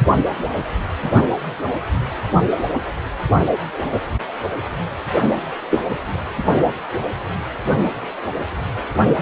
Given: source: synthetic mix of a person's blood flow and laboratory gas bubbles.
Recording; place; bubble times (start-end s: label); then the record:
Doppler ultrasound of blood flow; precordium
5.71-5.82 s: bubbles
From the record:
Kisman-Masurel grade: 113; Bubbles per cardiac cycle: 1 to 2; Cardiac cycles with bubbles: 1 to 10%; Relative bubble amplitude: loud (0.450 to 0.775); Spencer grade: 1 (occasional bubble signal discernible with the cardiac motion signal, with majority of cardiac periods free of bubbles); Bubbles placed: anywhere in the cardiac cycle